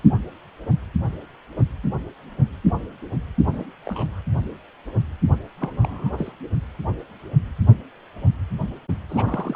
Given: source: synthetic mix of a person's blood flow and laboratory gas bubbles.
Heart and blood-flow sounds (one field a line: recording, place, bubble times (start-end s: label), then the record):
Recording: Doppler ultrasound of blood flow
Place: precordium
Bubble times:
3.54-3.67 s: bubbles
3.85-4.21 s: bubbles
5.58-6.13 s: bubbles
6.17-6.32 s: bubbles
9.09-9.56 s: bubbles
From the record:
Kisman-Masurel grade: 221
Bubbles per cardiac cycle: several, 3 to 8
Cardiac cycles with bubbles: 10 to 50%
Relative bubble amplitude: barely perceptible (0.100 to 0.250)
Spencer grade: 2 (many but less than half of the cardiac periods contain bubble signals, singularly or in groups)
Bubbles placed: only in the low amplitude regions of the cardiac cycle